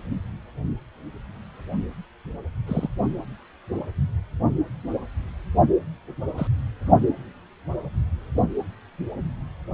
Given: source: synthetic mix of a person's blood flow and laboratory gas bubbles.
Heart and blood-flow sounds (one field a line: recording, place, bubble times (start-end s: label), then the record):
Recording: Doppler ultrasound of blood flow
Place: precordium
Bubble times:
2.67-2.88 s: bubbles
6.37-6.47 s: bubbles
From the record:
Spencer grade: 2 (many but less than half of the cardiac periods contain bubble signals, singularly or in groups)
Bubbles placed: only in the low amplitude regions of the cardiac cycle